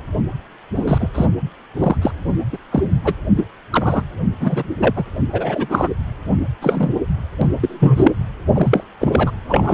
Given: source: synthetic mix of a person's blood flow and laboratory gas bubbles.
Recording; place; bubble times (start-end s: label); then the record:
Doppler ultrasound of blood flow; precordium
0.76-1.09 s: bubbles
1.14-1.26 s: bubbles
1.79-1.96 s: bubbles
2.02-2.11 s: bubbles
2.52-2.58 s: bubbles
2.71-2.83 s: bubbles
3.04-3.14 s: bubbles
3.36-3.48 s: bubbles
3.71-4.03 s: bubbles
4.40-4.63 s: bubbles
4.77-4.93 s: bubbles
4.96-5.04 s: bubbles
5.32-5.88 s: bubbles
6.61-6.92 s: bubbles
7.41-7.47 s: bubbles
7.60-8.12 s: bubbles
8.54-8.84 s: bubbles
8.99-9.31 s: bubbles
9.49-9.74 s: bubbles
From the record:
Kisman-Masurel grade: 243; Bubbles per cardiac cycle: several, 3 to 8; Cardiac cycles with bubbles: 100%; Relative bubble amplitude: loud (0.450 to 0.775); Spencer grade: 3 (all of the cardiac periods contain showers or single bubble signals, but not dominating or overriding the cardiac motion signals); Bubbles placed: anywhere in the cardiac cycle